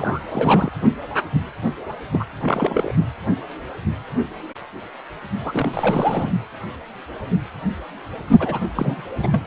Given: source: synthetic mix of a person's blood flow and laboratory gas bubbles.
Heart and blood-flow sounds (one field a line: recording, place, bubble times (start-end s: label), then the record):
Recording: Doppler ultrasound of blood flow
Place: precordium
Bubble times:
0.00-0.70 s: bubbles
2.12-2.26 s: bubbles
2.42-2.95 s: bubbles
5.44-6.32 s: bubbles
8.39-8.60 s: bubbles
8.75-9.02 s: bubbles
9.16-9.45 s: bubbles
From the record:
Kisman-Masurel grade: 332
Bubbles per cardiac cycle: rolling drumbeat, 9 or more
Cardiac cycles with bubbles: 50 to 99%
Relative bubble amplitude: moderate (0.250 to 0.450)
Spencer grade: 3 (all of the cardiac periods contain showers or single bubble signals, but not dominating or overriding the cardiac motion signals)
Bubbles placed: only in the low amplitude regions of the cardiac cycle